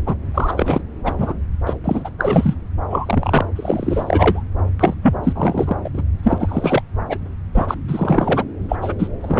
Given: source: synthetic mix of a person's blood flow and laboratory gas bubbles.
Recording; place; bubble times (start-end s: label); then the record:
Doppler ultrasound of blood flow; subclavian vein
0.06-0.15 s: bubbles
0.34-0.82 s: bubbles
1.04-1.15 s: bubbles
1.18-1.34 s: bubbles
1.66-1.75 s: bubbles
1.84-2.10 s: bubbles
2.18-2.54 s: bubbles
2.90-3.46 s: bubbles
3.56-4.43 s: bubbles
4.79-4.95 s: bubbles
5.01-5.15 s: bubbles
5.24-5.76 s: bubbles
5.83-5.89 s: bubbles
5.94-6.01 s: bubbles
6.19-6.82 s: bubbles
7.09-7.19 s: bubbles
7.55-7.76 s: bubbles
7.88-8.45 s: bubbles
8.69-8.76 s: bubbles
8.81-8.95 s: bubbles
8.98-9.07 s: bubbles
9.21-9.40 s: bubbles
From the record:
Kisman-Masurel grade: 343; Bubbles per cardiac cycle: rolling drumbeat, 9 or more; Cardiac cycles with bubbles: 100%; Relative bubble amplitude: loud (0.450 to 0.775); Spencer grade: 3 (all of the cardiac periods contain showers or single bubble signals, but not dominating or overriding the cardiac motion signals); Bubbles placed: anywhere in the cardiac cycle